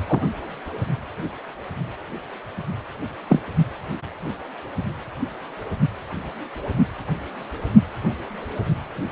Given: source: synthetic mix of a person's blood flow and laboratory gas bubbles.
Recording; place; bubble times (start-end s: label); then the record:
Doppler ultrasound of blood flow; precordium
0.08-0.22 s: bubbles
3.29-3.40 s: bubbles
From the record:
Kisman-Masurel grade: 123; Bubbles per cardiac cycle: 1 to 2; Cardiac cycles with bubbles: 10 to 50%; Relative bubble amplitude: loud (0.450 to 0.775); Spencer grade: 2 (many but less than half of the cardiac periods contain bubble signals, singularly or in groups); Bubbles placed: only in the low amplitude regions of the cardiac cycle